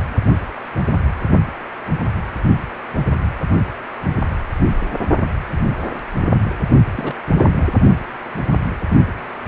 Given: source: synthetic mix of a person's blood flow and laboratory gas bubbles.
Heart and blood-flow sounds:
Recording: Doppler ultrasound of blood flow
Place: precordium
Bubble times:
6.95-7.15 s: bubbles
7.36-7.67 s: bubbles
From the record:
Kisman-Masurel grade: 211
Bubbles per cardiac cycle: several, 3 to 8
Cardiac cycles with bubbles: 1 to 10%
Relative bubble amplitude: barely perceptible (0.100 to 0.250)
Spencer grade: 1 (occasional bubble signal discernible with the cardiac motion signal, with majority of cardiac periods free of bubbles)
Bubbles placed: only in the low amplitude regions of the cardiac cycle

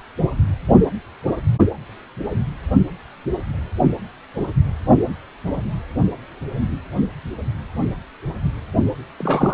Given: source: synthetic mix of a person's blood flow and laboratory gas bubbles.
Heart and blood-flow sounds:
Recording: Doppler ultrasound of blood flow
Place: precordium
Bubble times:
9.19-9.54 s: bubbles
From the record:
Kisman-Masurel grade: 113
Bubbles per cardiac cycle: 1 to 2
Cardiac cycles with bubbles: 1 to 10%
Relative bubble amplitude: loud (0.450 to 0.775)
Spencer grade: 1 (occasional bubble signal discernible with the cardiac motion signal, with majority of cardiac periods free of bubbles)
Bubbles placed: anywhere in the cardiac cycle

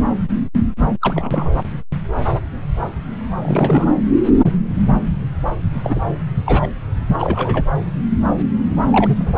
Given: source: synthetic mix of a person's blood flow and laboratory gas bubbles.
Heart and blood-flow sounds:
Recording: Doppler ultrasound of blood flow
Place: subclavian vein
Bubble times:
1.02-1.50 s: bubbles
3.42-3.88 s: bubbles
5.70-6.00 s: bubbles
6.46-6.68 s: bubbles
7.18-7.65 s: bubbles
8.90-9.38 s: bubbles
From the record:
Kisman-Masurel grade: 222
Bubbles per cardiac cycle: several, 3 to 8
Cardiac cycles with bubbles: 10 to 50%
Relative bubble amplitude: moderate (0.250 to 0.450)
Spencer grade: 2 (many but less than half of the cardiac periods contain bubble signals, singularly or in groups)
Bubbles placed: anywhere in the cardiac cycle

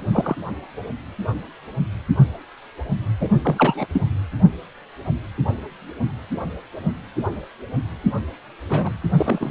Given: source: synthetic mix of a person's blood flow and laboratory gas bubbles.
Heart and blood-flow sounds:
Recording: Doppler ultrasound of blood flow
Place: precordium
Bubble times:
0.12-0.35 s: bubbles
3.21-3.29 s: bubbles
3.44-3.87 s: bubbles
3.93-4.02 s: bubbles
8.68-8.93 s: bubbles
9.17-9.51 s: bubbles
From the record:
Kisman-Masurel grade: 332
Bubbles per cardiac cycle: rolling drumbeat, 9 or more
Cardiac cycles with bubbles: 50 to 99%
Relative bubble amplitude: moderate (0.250 to 0.450)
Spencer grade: 3 (all of the cardiac periods contain showers or single bubble signals, but not dominating or overriding the cardiac motion signals)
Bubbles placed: anywhere in the cardiac cycle

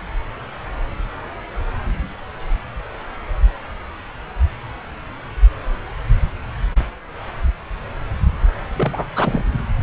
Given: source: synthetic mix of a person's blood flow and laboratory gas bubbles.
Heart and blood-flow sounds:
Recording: Doppler ultrasound of blood flow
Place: subclavian vein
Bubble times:
8.76-9.07 s: bubbles
9.15-9.44 s: bubbles
From the record:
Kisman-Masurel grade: 213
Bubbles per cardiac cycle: several, 3 to 8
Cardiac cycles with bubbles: 1 to 10%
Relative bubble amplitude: loud (0.450 to 0.775)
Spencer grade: 1 (occasional bubble signal discernible with the cardiac motion signal, with majority of cardiac periods free of bubbles)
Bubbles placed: anywhere in the cardiac cycle

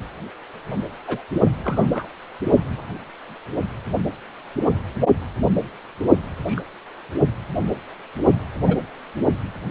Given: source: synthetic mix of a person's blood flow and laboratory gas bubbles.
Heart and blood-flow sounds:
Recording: Doppler ultrasound of blood flow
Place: precordium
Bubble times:
1.07-1.23 s: bubbles
1.64-2.08 s: bubbles
6.46-6.62 s: bubbles
8.67-8.78 s: bubbles
From the record:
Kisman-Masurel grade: 122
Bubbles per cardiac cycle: 1 to 2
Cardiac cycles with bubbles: 10 to 50%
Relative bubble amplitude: moderate (0.250 to 0.450)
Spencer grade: 2 (many but less than half of the cardiac periods contain bubble signals, singularly or in groups)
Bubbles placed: only in the low amplitude regions of the cardiac cycle

